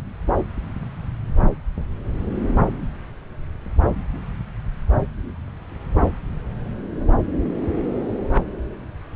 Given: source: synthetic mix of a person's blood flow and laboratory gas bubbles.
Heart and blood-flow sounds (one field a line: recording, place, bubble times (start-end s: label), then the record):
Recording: Doppler ultrasound of blood flow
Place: subclavian vein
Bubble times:
no bubbles
From the record:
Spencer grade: 0 (complete lack of bubble signals)